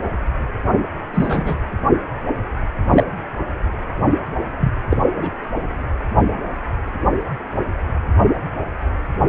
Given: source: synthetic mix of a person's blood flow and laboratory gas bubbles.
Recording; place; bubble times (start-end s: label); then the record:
Doppler ultrasound of blood flow; precordium
1.14-1.58 s: bubbles
2.90-3.04 s: bubbles
4.59-4.73 s: bubbles
4.90-5.02 s: bubbles
5.16-5.34 s: bubbles
From the record:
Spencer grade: 2 (many but less than half of the cardiac periods contain bubble signals, singularly or in groups); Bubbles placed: anywhere in the cardiac cycle